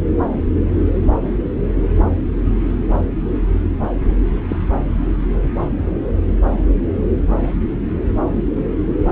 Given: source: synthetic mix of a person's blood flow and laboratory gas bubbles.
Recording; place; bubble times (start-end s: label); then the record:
Doppler ultrasound of blood flow; subclavian vein
4.49-4.57 s: bubbles
From the record:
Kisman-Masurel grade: 113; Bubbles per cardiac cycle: 1 to 2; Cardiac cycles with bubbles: 1 to 10%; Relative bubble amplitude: loud (0.450 to 0.775); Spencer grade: 1 (occasional bubble signal discernible with the cardiac motion signal, with majority of cardiac periods free of bubbles); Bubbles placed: anywhere in the cardiac cycle